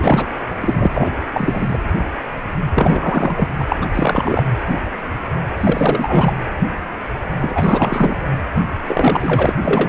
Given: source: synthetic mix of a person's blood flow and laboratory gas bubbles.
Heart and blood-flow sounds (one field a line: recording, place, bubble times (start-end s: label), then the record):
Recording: Doppler ultrasound of blood flow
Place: precordium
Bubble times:
0.00-0.26 s: bubbles
0.60-0.87 s: bubbles
0.90-1.11 s: bubbles
1.33-1.78 s: bubbles
2.74-3.48 s: bubbles
3.56-3.65 s: bubbles
3.69-3.76 s: bubbles
3.81-3.86 s: bubbles
3.94-4.43 s: bubbles
5.57-6.37 s: bubbles
7.41-8.17 s: bubbles
8.54-8.62 s: bubbles
8.87-9.53 s: bubbles
9.64-9.89 s: bubbles
From the record:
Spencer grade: 3 (all of the cardiac periods contain showers or single bubble signals, but not dominating or overriding the cardiac motion signals)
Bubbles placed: anywhere in the cardiac cycle